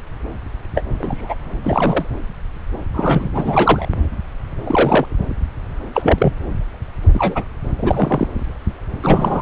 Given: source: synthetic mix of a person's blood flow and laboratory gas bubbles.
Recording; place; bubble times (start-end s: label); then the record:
Doppler ultrasound of blood flow; subclavian vein
0.75-0.84 s: bubbles
0.99-1.34 s: bubbles
1.64-2.05 s: bubbles
2.94-3.29 s: bubbles
3.34-3.88 s: bubbles
4.66-5.06 s: bubbles
5.94-6.33 s: bubbles
7.14-7.45 s: bubbles
7.78-8.27 s: bubbles
9.03-9.42 s: bubbles
From the record:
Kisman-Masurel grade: 233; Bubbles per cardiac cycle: several, 3 to 8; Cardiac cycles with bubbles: 50 to 99%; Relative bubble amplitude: loud (0.450 to 0.775); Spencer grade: 3 (all of the cardiac periods contain showers or single bubble signals, but not dominating or overriding the cardiac motion signals); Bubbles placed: anywhere in the cardiac cycle